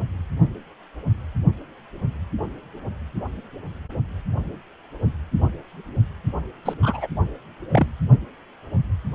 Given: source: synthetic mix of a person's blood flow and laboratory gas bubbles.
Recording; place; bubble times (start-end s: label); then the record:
Doppler ultrasound of blood flow; precordium
6.64-6.74 s: bubbles
6.83-7.07 s: bubbles
7.70-7.87 s: bubbles
From the record:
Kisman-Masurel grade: 122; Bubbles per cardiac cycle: 1 to 2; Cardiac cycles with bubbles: 10 to 50%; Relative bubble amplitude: moderate (0.250 to 0.450); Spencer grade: 2 (many but less than half of the cardiac periods contain bubble signals, singularly or in groups); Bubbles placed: only in the low amplitude regions of the cardiac cycle